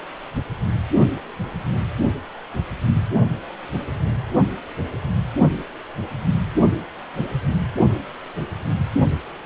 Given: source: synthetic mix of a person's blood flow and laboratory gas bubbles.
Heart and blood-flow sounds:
Doppler ultrasound of blood flow; precordium
no bubbles
From the record:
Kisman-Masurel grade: 000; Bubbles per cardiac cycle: 0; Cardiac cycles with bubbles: 0%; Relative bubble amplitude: no bubbles discernible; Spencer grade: 0 (complete lack of bubble signals)

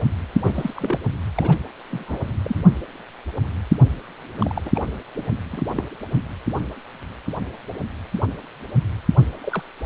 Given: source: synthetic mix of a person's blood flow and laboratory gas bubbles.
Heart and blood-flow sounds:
Doppler ultrasound of blood flow; precordium
0.44-0.99 s: bubbles
1.35-1.57 s: bubbles
1.90-2.29 s: bubbles
2.43-2.56 s: bubbles
4.41-4.61 s: bubbles
4.65-4.71 s: bubbles
4.75-4.80 s: bubbles
5.17-5.22 s: bubbles
5.52-5.61 s: bubbles
5.76-5.83 s: bubbles
9.43-9.62 s: bubbles
From the record:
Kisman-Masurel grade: 221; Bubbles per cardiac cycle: several, 3 to 8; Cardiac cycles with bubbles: 10 to 50%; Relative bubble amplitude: barely perceptible (0.100 to 0.250); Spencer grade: 2 (many but less than half of the cardiac periods contain bubble signals, singularly or in groups); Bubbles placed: anywhere in the cardiac cycle

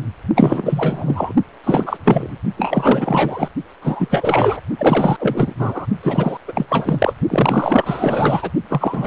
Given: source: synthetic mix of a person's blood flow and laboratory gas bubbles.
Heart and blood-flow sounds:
Doppler ultrasound of blood flow; precordium
0.35-1.33 s: bubbles
1.64-1.97 s: bubbles
2.04-2.37 s: bubbles
2.57-3.48 s: bubbles
3.81-4.60 s: bubbles
4.78-5.16 s: bubbles
5.19-5.54 s: bubbles
5.59-5.87 s: bubbles
6.03-6.37 s: bubbles
6.47-6.65 s: bubbles
6.69-7.13 s: bubbles
7.30-8.51 s: bubbles
8.69-9.07 s: bubbles
From the record:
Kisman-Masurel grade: 444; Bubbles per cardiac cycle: continuous sound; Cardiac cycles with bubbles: 100%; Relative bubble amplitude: maximal (0.775 to 0.999); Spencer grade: 4 (maximum detectable bubble signal sounding continuously throughout systole and diastole of every cardiac period, and overriding the amplitude of the normal cardiac signals); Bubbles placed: only in the low amplitude regions of the cardiac cycle

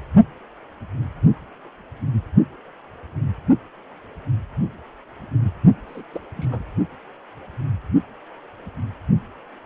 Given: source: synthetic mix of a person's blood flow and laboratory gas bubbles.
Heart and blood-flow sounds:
Doppler ultrasound of blood flow; precordium
5.88-6.02 s: bubbles
6.13-6.20 s: bubbles
6.36-6.47 s: bubbles
6.51-6.61 s: bubbles
From the record:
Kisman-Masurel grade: 211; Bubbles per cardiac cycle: several, 3 to 8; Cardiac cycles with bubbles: 1 to 10%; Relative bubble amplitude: barely perceptible (0.100 to 0.250); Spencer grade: 1 (occasional bubble signal discernible with the cardiac motion signal, with majority of cardiac periods free of bubbles); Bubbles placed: only in the low amplitude regions of the cardiac cycle

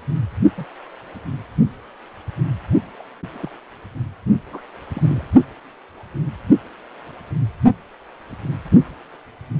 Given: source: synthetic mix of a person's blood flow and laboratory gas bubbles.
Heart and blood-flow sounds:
Doppler ultrasound of blood flow; precordium
0.57-0.65 s: bubbles
2.99-3.02 s: bubbles
3.33-3.51 s: bubbles
4.51-4.61 s: bubbles
4.94-5.25 s: bubbles
From the record:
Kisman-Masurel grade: 121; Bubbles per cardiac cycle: 1 to 2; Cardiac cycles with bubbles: 10 to 50%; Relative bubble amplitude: barely perceptible (0.100 to 0.250); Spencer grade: 2 (many but less than half of the cardiac periods contain bubble signals, singularly or in groups); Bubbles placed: only in the low amplitude regions of the cardiac cycle

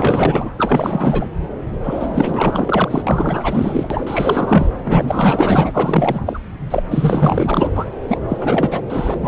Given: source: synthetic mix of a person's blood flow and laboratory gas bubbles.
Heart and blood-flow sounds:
Doppler ultrasound of blood flow; subclavian vein
0.00-0.53 s: bubbles
0.58-1.29 s: bubbles
1.83-3.02 s: bubbles
3.06-4.69 s: bubbles
4.84-6.39 s: bubbles
6.70-6.83 s: bubbles
6.91-7.69 s: bubbles
7.75-7.84 s: bubbles
8.07-8.21 s: bubbles
8.28-8.81 s: bubbles
8.89-9.14 s: bubbles
9.17-9.28 s: bubbles
From the record:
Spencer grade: 4 (maximum detectable bubble signal sounding continuously throughout systole and diastole of every cardiac period, and overriding the amplitude of the normal cardiac signals); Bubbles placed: anywhere in the cardiac cycle

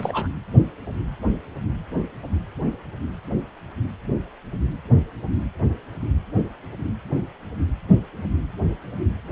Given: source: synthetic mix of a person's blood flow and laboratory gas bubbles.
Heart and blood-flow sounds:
Doppler ultrasound of blood flow; precordium
0.00-0.28 s: bubbles
From the record:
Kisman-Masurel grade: 222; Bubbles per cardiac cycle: several, 3 to 8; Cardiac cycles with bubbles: 10 to 50%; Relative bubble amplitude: moderate (0.250 to 0.450); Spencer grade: 2 (many but less than half of the cardiac periods contain bubble signals, singularly or in groups); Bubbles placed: only in the low amplitude regions of the cardiac cycle

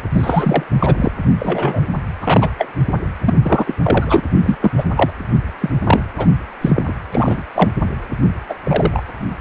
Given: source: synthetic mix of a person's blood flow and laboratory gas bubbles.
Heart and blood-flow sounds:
Doppler ultrasound of blood flow; precordium
0.00-0.02 s: bubbles
0.14-0.64 s: bubbles
0.79-1.11 s: bubbles
1.39-1.90 s: bubbles
2.22-2.50 s: bubbles
2.58-2.69 s: bubbles
3.25-3.34 s: bubbles
3.42-3.77 s: bubbles
3.84-4.21 s: bubbles
4.36-4.56 s: bubbles
4.62-4.71 s: bubbles
4.77-4.84 s: bubbles
4.96-5.11 s: bubbles
5.60-5.70 s: bubbles
5.84-6.01 s: bubbles
6.18-6.27 s: bubbles
6.61-6.83 s: bubbles
6.88-6.93 s: bubbles
7.12-7.42 s: bubbles
7.54-7.72 s: bubbles
8.49-8.55 s: bubbles
8.63-9.03 s: bubbles
From the record:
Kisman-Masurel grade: 243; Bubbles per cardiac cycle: several, 3 to 8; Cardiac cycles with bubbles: 100%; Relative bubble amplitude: loud (0.450 to 0.775); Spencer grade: 3 (all of the cardiac periods contain showers or single bubble signals, but not dominating or overriding the cardiac motion signals); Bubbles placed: anywhere in the cardiac cycle

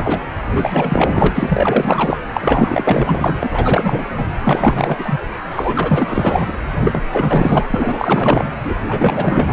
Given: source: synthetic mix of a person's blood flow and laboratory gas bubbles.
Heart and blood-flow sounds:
Doppler ultrasound of blood flow; precordium
0.00-0.23 s: bubbles
0.50-2.18 s: bubbles
2.33-4.07 s: bubbles
4.17-4.26 s: bubbles
4.44-5.19 s: bubbles
5.50-6.52 s: bubbles
6.71-7.03 s: bubbles
7.11-7.67 s: bubbles
7.70-8.51 s: bubbles
8.63-8.75 s: bubbles
8.88-9.53 s: bubbles
From the record:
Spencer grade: 4 (maximum detectable bubble signal sounding continuously throughout systole and diastole of every cardiac period, and overriding the amplitude of the normal cardiac signals); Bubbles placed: anywhere in the cardiac cycle

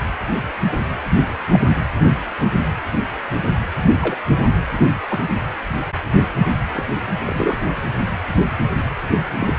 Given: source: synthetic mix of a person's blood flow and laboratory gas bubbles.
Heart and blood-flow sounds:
Doppler ultrasound of blood flow; precordium
1.50-1.60 s: bubbles
4.01-4.17 s: bubbles
5.09-5.20 s: bubbles
6.75-6.83 s: bubbles
7.21-7.61 s: bubbles
9.11-9.21 s: bubbles
9.40-9.54 s: bubbles
From the record:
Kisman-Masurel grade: 122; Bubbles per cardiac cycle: 1 to 2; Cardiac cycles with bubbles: 10 to 50%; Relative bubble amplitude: moderate (0.250 to 0.450); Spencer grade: 2 (many but less than half of the cardiac periods contain bubble signals, singularly or in groups); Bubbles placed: anywhere in the cardiac cycle

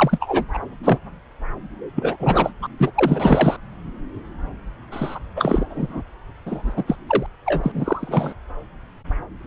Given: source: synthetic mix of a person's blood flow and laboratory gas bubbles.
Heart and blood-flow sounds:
Doppler ultrasound of blood flow; subclavian vein
0.00-0.45 s: bubbles
0.53-0.58 s: bubbles
0.83-0.99 s: bubbles
1.95-2.17 s: bubbles
2.20-2.52 s: bubbles
2.62-2.67 s: bubbles
2.78-2.92 s: bubbles
2.95-3.57 s: bubbles
4.92-5.19 s: bubbles
5.36-5.65 s: bubbles
5.70-6.02 s: bubbles
6.46-6.73 s: bubbles
6.76-6.84 s: bubbles
6.87-6.96 s: bubbles
7.07-7.26 s: bubbles
7.46-8.33 s: bubbles
From the record:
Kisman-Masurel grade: 333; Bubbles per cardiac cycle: rolling drumbeat, 9 or more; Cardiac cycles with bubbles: 50 to 99%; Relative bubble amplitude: loud (0.450 to 0.775); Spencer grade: 3 (all of the cardiac periods contain showers or single bubble signals, but not dominating or overriding the cardiac motion signals); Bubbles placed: anywhere in the cardiac cycle

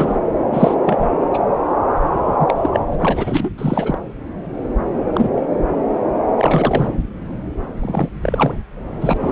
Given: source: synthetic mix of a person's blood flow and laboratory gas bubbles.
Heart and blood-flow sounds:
Doppler ultrasound of blood flow; subclavian vein
0.00-0.20 s: bubbles
0.52-0.74 s: bubbles
0.85-1.10 s: bubbles
1.33-1.39 s: bubbles
2.26-2.54 s: bubbles
2.60-2.80 s: bubbles
2.92-2.96 s: bubbles
2.98-3.50 s: bubbles
3.58-3.98 s: bubbles
5.13-5.30 s: bubbles
5.34-5.46 s: bubbles
6.37-6.87 s: bubbles
7.81-8.09 s: bubbles
8.22-8.54 s: bubbles
9.01-9.17 s: bubbles
9.20-9.31 s: bubbles
From the record:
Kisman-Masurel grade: 233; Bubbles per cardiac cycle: several, 3 to 8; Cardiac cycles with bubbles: 50 to 99%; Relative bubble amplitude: loud (0.450 to 0.775); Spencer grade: 3 (all of the cardiac periods contain showers or single bubble signals, but not dominating or overriding the cardiac motion signals); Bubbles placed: anywhere in the cardiac cycle

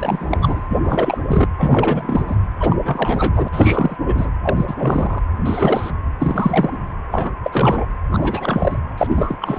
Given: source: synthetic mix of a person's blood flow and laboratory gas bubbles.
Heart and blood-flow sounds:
Doppler ultrasound of blood flow; precordium
0.00-1.22 s: bubbles
1.27-1.47 s: bubbles
1.58-2.37 s: bubbles
2.60-2.77 s: bubbles
2.83-3.49 s: bubbles
3.52-3.97 s: bubbles
4.05-4.30 s: bubbles
4.42-5.21 s: bubbles
5.45-5.90 s: bubbles
6.19-6.89 s: bubbles
7.11-7.30 s: bubbles
7.43-7.85 s: bubbles
8.11-8.79 s: bubbles
8.98-9.38 s: bubbles
9.41-9.59 s: bubbles
From the record:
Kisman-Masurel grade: 333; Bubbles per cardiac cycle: rolling drumbeat, 9 or more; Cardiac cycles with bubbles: 50 to 99%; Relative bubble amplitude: loud (0.450 to 0.775); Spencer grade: 3 (all of the cardiac periods contain showers or single bubble signals, but not dominating or overriding the cardiac motion signals); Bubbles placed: anywhere in the cardiac cycle

